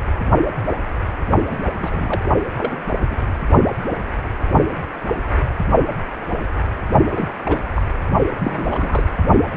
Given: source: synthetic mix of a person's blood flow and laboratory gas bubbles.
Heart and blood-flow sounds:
Doppler ultrasound of blood flow; precordium
1.50-1.57 s: bubbles
1.64-1.72 s: bubbles
1.78-2.26 s: bubbles
2.57-2.79 s: bubbles
3.09-3.32 s: bubbles
7.12-7.27 s: bubbles
7.44-7.59 s: bubbles
7.74-7.82 s: bubbles
8.39-9.03 s: bubbles
From the record:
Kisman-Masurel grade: 222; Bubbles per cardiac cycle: several, 3 to 8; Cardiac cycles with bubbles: 10 to 50%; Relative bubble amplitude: moderate (0.250 to 0.450); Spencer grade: 2 (many but less than half of the cardiac periods contain bubble signals, singularly or in groups); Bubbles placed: only in the low amplitude regions of the cardiac cycle

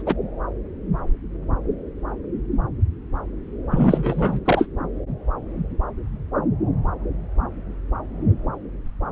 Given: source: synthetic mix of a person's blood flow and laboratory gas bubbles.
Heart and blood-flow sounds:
Doppler ultrasound of blood flow; subclavian vein
0.06-0.15 s: bubbles
3.70-4.40 s: bubbles
4.45-4.67 s: bubbles
From the record:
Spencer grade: 2 (many but less than half of the cardiac periods contain bubble signals, singularly or in groups); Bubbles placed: anywhere in the cardiac cycle

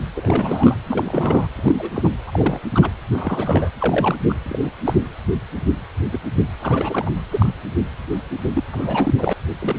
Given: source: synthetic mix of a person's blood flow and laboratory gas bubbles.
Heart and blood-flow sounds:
Doppler ultrasound of blood flow; precordium
0.15-0.75 s: bubbles
0.86-1.48 s: bubbles
1.55-1.92 s: bubbles
1.95-2.10 s: bubbles
2.27-2.60 s: bubbles
2.74-2.90 s: bubbles
3.11-3.70 s: bubbles
3.79-4.15 s: bubbles
4.29-4.35 s: bubbles
4.45-4.58 s: bubbles
4.63-4.71 s: bubbles
4.84-4.94 s: bubbles
6.11-6.19 s: bubbles
6.59-7.10 s: bubbles
7.31-7.54 s: bubbles
8.54-8.63 s: bubbles
8.72-9.13 s: bubbles
9.17-9.33 s: bubbles
9.61-9.77 s: bubbles
From the record:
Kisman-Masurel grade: 232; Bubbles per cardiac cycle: several, 3 to 8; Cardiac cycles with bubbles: 50 to 99%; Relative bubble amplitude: moderate (0.250 to 0.450); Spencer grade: 3 (all of the cardiac periods contain showers or single bubble signals, but not dominating or overriding the cardiac motion signals); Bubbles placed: anywhere in the cardiac cycle

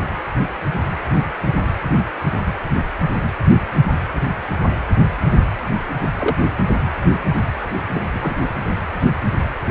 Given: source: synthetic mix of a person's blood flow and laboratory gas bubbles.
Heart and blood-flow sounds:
Doppler ultrasound of blood flow; precordium
6.01-6.09 s: bubbles
6.20-6.36 s: bubbles
7.94-8.04 s: bubbles
8.13-8.35 s: bubbles
From the record:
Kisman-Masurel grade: 122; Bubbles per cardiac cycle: 1 to 2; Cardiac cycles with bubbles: 10 to 50%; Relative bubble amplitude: moderate (0.250 to 0.450); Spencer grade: 2 (many but less than half of the cardiac periods contain bubble signals, singularly or in groups); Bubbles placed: anywhere in the cardiac cycle

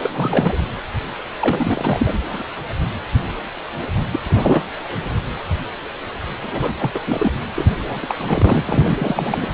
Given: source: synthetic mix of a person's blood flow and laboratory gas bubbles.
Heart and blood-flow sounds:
Doppler ultrasound of blood flow; precordium
0.02-0.57 s: bubbles
1.40-2.44 s: bubbles
4.12-4.19 s: bubbles
4.24-4.63 s: bubbles
6.43-6.73 s: bubbles
6.79-6.91 s: bubbles
6.93-6.99 s: bubbles
7.06-7.31 s: bubbles
7.54-7.65 s: bubbles
7.69-7.75 s: bubbles
7.86-7.99 s: bubbles
8.02-8.15 s: bubbles
8.18-8.63 s: bubbles
8.66-9.46 s: bubbles
From the record:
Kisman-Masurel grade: 332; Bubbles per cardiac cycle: rolling drumbeat, 9 or more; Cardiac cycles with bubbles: 50 to 99%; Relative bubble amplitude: moderate (0.250 to 0.450); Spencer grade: 3 (all of the cardiac periods contain showers or single bubble signals, but not dominating or overriding the cardiac motion signals); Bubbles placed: anywhere in the cardiac cycle

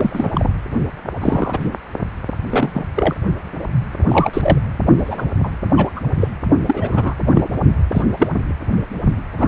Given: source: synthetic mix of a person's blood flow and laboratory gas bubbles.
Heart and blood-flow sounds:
Doppler ultrasound of blood flow; precordium
0.00-0.30 s: bubbles
0.33-0.50 s: bubbles
1.20-1.77 s: bubbles
2.50-2.84 s: bubbles
2.95-3.15 s: bubbles
4.08-4.59 s: bubbles
4.99-5.25 s: bubbles
5.43-5.50 s: bubbles
5.76-5.90 s: bubbles
5.96-6.00 s: bubbles
6.20-6.28 s: bubbles
6.66-7.14 s: bubbles
7.34-7.50 s: bubbles
7.92-8.03 s: bubbles
8.19-8.29 s: bubbles
9.38-9.48 s: bubbles
From the record:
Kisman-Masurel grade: 243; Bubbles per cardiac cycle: several, 3 to 8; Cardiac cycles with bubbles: 100%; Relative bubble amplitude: loud (0.450 to 0.775); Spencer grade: 3 (all of the cardiac periods contain showers or single bubble signals, but not dominating or overriding the cardiac motion signals); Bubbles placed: only in the low amplitude regions of the cardiac cycle

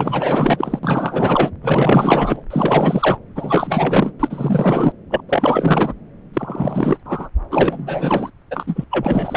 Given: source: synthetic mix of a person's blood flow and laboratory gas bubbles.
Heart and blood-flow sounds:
Doppler ultrasound of blood flow; subclavian vein
0.00-0.79 s: bubbles
0.83-1.51 s: bubbles
1.62-2.42 s: bubbles
2.50-3.17 s: bubbles
3.35-4.12 s: bubbles
4.19-4.92 s: bubbles
5.10-5.21 s: bubbles
5.29-5.93 s: bubbles
6.33-6.98 s: bubbles
7.05-7.29 s: bubbles
7.51-8.30 s: bubbles
8.50-8.85 s: bubbles
8.90-9.37 s: bubbles
From the record:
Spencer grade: 4 (maximum detectable bubble signal sounding continuously throughout systole and diastole of every cardiac period, and overriding the amplitude of the normal cardiac signals); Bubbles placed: anywhere in the cardiac cycle

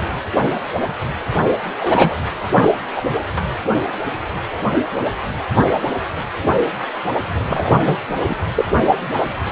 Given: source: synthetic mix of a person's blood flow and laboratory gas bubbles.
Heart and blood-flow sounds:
Doppler ultrasound of blood flow; precordium
1.79-2.16 s: bubbles
2.52-2.73 s: bubbles
2.96-3.02 s: bubbles
7.48-7.97 s: bubbles
8.28-8.36 s: bubbles
8.55-8.65 s: bubbles
From the record:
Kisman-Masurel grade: 233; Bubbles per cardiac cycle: several, 3 to 8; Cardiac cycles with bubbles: 50 to 99%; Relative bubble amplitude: loud (0.450 to 0.775); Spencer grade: 3 (all of the cardiac periods contain showers or single bubble signals, but not dominating or overriding the cardiac motion signals); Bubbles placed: anywhere in the cardiac cycle

